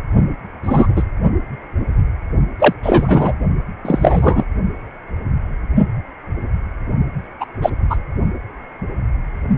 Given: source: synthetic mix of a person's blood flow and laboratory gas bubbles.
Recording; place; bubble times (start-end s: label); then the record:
Doppler ultrasound of blood flow; precordium
0.64-0.87 s: bubbles
0.96-1.03 s: bubbles
2.59-2.74 s: bubbles
2.83-3.33 s: bubbles
3.85-4.44 s: bubbles
7.40-7.46 s: bubbles
7.62-7.70 s: bubbles
7.90-7.97 s: bubbles
From the record:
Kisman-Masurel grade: 223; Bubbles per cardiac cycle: several, 3 to 8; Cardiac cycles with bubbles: 10 to 50%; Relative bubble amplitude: loud (0.450 to 0.775); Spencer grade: 2 (many but less than half of the cardiac periods contain bubble signals, singularly or in groups); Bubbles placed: only in the low amplitude regions of the cardiac cycle